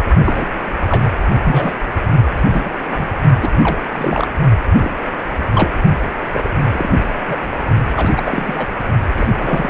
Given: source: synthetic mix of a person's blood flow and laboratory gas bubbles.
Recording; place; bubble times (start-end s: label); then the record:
Doppler ultrasound of blood flow; precordium
0.25-0.47 s: bubbles
0.87-1.15 s: bubbles
1.43-1.73 s: bubbles
2.35-2.72 s: bubbles
2.91-3.08 s: bubbles
3.42-3.50 s: bubbles
3.58-3.81 s: bubbles
3.92-4.27 s: bubbles
4.80-4.92 s: bubbles
5.51-5.71 s: bubbles
6.33-6.48 s: bubbles
6.67-6.99 s: bubbles
7.21-7.50 s: bubbles
7.96-8.66 s: bubbles
9.17-9.28 s: bubbles
9.32-9.69 s: bubbles
From the record:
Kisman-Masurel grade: 242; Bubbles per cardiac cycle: several, 3 to 8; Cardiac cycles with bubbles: 100%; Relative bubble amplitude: moderate (0.250 to 0.450); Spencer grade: 3 (all of the cardiac periods contain showers or single bubble signals, but not dominating or overriding the cardiac motion signals); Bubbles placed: only in the low amplitude regions of the cardiac cycle